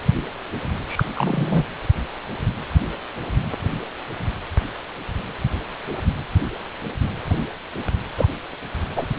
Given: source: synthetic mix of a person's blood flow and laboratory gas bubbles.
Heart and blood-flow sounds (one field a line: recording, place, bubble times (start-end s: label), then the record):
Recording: Doppler ultrasound of blood flow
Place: precordium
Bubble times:
0.88-1.04 s: bubbles
1.16-1.65 s: bubbles
8.18-8.28 s: bubbles
8.96-9.06 s: bubbles
From the record:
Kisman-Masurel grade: 113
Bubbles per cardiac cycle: 1 to 2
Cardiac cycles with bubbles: 1 to 10%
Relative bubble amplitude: loud (0.450 to 0.775)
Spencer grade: 1 (occasional bubble signal discernible with the cardiac motion signal, with majority of cardiac periods free of bubbles)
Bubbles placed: anywhere in the cardiac cycle